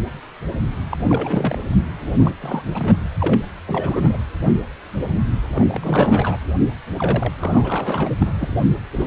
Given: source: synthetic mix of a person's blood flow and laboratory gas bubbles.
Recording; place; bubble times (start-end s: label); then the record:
Doppler ultrasound of blood flow; precordium
0.91-0.97 s: bubbles
1.00-1.05 s: bubbles
1.09-1.59 s: bubbles
1.70-1.82 s: bubbles
2.01-2.13 s: bubbles
2.17-2.33 s: bubbles
2.41-2.95 s: bubbles
3.20-3.38 s: bubbles
3.67-4.17 s: bubbles
5.55-6.38 s: bubbles
6.97-7.33 s: bubbles
7.39-8.11 s: bubbles
8.20-8.37 s: bubbles
8.40-8.56 s: bubbles
8.98-9.06 s: bubbles
From the record:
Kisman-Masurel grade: 332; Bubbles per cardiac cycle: rolling drumbeat, 9 or more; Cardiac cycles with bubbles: 50 to 99%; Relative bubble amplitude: moderate (0.250 to 0.450); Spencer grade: 3 (all of the cardiac periods contain showers or single bubble signals, but not dominating or overriding the cardiac motion signals); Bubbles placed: anywhere in the cardiac cycle